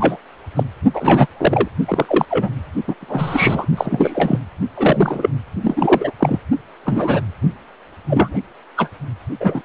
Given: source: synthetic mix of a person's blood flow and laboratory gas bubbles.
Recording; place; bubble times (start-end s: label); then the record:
Doppler ultrasound of blood flow; precordium
0.00-0.17 s: bubbles
0.55-0.64 s: bubbles
0.93-1.27 s: bubbles
1.37-1.69 s: bubbles
1.88-2.05 s: bubbles
2.08-2.25 s: bubbles
2.30-2.49 s: bubbles
2.88-2.94 s: bubbles
3.01-3.66 s: bubbles
3.77-4.39 s: bubbles
4.77-5.29 s: bubbles
5.62-6.12 s: bubbles
6.18-6.39 s: bubbles
6.85-7.21 s: bubbles
8.07-8.43 s: bubbles
8.76-8.89 s: bubbles
9.40-9.62 s: bubbles
From the record:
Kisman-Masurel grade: 243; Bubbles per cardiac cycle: several, 3 to 8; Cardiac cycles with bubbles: 100%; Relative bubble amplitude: loud (0.450 to 0.775); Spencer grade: 3 (all of the cardiac periods contain showers or single bubble signals, but not dominating or overriding the cardiac motion signals); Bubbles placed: only in the low amplitude regions of the cardiac cycle